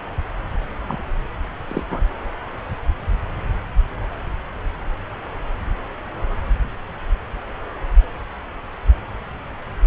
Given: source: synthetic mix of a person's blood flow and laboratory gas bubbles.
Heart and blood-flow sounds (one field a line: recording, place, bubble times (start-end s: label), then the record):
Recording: Doppler ultrasound of blood flow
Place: subclavian vein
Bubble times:
0.85-1.03 s: bubbles
1.68-1.83 s: bubbles
1.89-2.02 s: bubbles
From the record:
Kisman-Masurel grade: 212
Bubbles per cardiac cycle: several, 3 to 8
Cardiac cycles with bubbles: 1 to 10%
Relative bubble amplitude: moderate (0.250 to 0.450)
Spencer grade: 1 (occasional bubble signal discernible with the cardiac motion signal, with majority of cardiac periods free of bubbles)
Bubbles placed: anywhere in the cardiac cycle